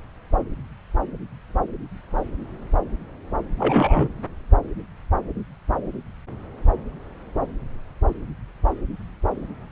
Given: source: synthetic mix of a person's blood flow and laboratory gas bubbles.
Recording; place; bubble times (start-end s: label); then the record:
Doppler ultrasound of blood flow; subclavian vein
3.58-4.09 s: bubbles
From the record:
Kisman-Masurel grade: 112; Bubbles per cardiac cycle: 1 to 2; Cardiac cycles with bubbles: 1 to 10%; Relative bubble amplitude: moderate (0.250 to 0.450); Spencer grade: 1 (occasional bubble signal discernible with the cardiac motion signal, with majority of cardiac periods free of bubbles); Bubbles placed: anywhere in the cardiac cycle